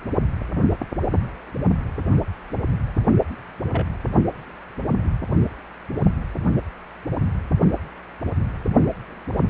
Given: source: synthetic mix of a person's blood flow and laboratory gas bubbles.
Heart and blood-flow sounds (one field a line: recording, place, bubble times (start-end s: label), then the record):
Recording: Doppler ultrasound of blood flow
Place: precordium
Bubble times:
3.73-3.86 s: bubbles
From the record:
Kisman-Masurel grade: 111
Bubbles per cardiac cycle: 1 to 2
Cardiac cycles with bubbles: 1 to 10%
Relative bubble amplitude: barely perceptible (0.100 to 0.250)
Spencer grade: 1 (occasional bubble signal discernible with the cardiac motion signal, with majority of cardiac periods free of bubbles)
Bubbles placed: only in the low amplitude regions of the cardiac cycle